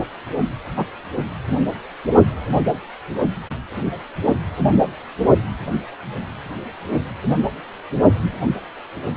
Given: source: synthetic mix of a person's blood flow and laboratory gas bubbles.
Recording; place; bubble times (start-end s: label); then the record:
Doppler ultrasound of blood flow; precordium
0.77-0.85 s: bubbles
From the record:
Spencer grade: 1 (occasional bubble signal discernible with the cardiac motion signal, with majority of cardiac periods free of bubbles); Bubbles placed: only in the low amplitude regions of the cardiac cycle